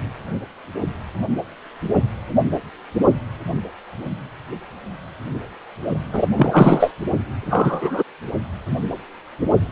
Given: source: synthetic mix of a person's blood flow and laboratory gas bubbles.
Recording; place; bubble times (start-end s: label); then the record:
Doppler ultrasound of blood flow; precordium
6.12-6.27 s: bubbles
6.37-6.92 s: bubbles
7.41-8.03 s: bubbles
From the record:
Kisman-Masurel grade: 223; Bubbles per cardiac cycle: several, 3 to 8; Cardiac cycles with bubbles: 10 to 50%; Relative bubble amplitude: loud (0.450 to 0.775); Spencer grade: 2 (many but less than half of the cardiac periods contain bubble signals, singularly or in groups); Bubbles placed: only in the low amplitude regions of the cardiac cycle